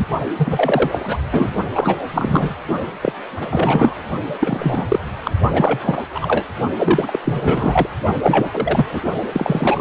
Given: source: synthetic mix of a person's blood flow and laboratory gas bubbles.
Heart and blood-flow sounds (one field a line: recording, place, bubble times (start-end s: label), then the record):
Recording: Doppler ultrasound of blood flow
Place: precordium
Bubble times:
0.00-0.06 s: bubbles
0.38-1.17 s: bubbles
1.31-1.52 s: bubbles
1.74-1.96 s: bubbles
2.12-2.55 s: bubbles
3.01-3.12 s: bubbles
3.41-3.95 s: bubbles
4.41-4.83 s: bubbles
4.88-4.99 s: bubbles
5.24-5.31 s: bubbles
5.52-6.01 s: bubbles
6.14-6.46 s: bubbles
6.78-7.20 s: bubbles
7.24-7.89 s: bubbles
8.22-8.86 s: bubbles
8.91-9.01 s: bubbles
9.32-9.81 s: bubbles
From the record:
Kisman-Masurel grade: 343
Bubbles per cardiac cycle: rolling drumbeat, 9 or more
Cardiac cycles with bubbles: 100%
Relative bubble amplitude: loud (0.450 to 0.775)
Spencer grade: 3 (all of the cardiac periods contain showers or single bubble signals, but not dominating or overriding the cardiac motion signals)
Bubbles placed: only in the low amplitude regions of the cardiac cycle